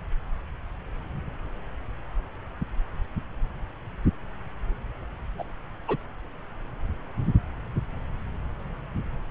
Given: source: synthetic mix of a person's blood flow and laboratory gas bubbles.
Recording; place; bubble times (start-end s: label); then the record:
Doppler ultrasound of blood flow; subclavian vein
5.38-5.44 s: bubbles
5.88-5.96 s: bubbles
From the record:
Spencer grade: 2 (many but less than half of the cardiac periods contain bubble signals, singularly or in groups); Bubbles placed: anywhere in the cardiac cycle